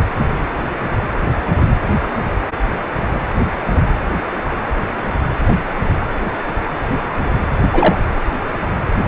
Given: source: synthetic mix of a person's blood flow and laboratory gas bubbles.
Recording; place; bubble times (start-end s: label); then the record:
Doppler ultrasound of blood flow; precordium
7.72-7.96 s: bubbles
From the record:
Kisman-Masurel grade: 113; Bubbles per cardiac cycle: 1 to 2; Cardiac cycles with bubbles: 1 to 10%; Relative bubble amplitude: loud (0.450 to 0.775); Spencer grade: 1 (occasional bubble signal discernible with the cardiac motion signal, with majority of cardiac periods free of bubbles); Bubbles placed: anywhere in the cardiac cycle